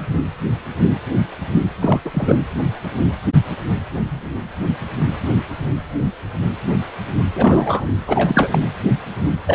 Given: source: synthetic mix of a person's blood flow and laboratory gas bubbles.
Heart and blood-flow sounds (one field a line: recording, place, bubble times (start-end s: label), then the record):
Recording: Doppler ultrasound of blood flow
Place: precordium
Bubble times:
1.81-2.00 s: bubbles
2.05-2.10 s: bubbles
2.14-2.41 s: bubbles
7.35-7.86 s: bubbles
8.07-8.58 s: bubbles
9.47-9.55 s: bubbles
From the record:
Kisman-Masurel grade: 223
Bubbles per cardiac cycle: several, 3 to 8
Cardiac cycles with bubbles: 10 to 50%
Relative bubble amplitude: loud (0.450 to 0.775)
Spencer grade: 2 (many but less than half of the cardiac periods contain bubble signals, singularly or in groups)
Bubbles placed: anywhere in the cardiac cycle